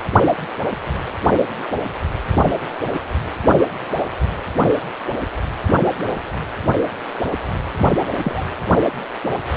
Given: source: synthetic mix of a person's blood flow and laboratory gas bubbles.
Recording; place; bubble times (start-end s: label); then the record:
Doppler ultrasound of blood flow; precordium
8.23-8.46 s: bubbles
From the record:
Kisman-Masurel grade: 112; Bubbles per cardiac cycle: 1 to 2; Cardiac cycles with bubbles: 1 to 10%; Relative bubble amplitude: moderate (0.250 to 0.450); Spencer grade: 1 (occasional bubble signal discernible with the cardiac motion signal, with majority of cardiac periods free of bubbles); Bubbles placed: anywhere in the cardiac cycle